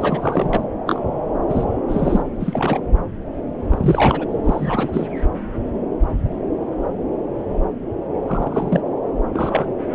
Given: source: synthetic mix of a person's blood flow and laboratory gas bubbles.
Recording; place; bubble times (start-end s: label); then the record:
Doppler ultrasound of blood flow; subclavian vein
0.00-0.64 s: bubbles
0.86-1.01 s: bubbles
1.39-1.71 s: bubbles
1.88-2.22 s: bubbles
2.40-2.80 s: bubbles
3.70-4.25 s: bubbles
4.44-5.08 s: bubbles
8.28-8.80 s: bubbles
9.33-9.72 s: bubbles
9.92-9.95 s: bubbles
From the record:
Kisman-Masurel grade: 232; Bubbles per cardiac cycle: several, 3 to 8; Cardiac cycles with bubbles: 50 to 99%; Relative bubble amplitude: moderate (0.250 to 0.450); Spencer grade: 3 (all of the cardiac periods contain showers or single bubble signals, but not dominating or overriding the cardiac motion signals); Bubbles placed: anywhere in the cardiac cycle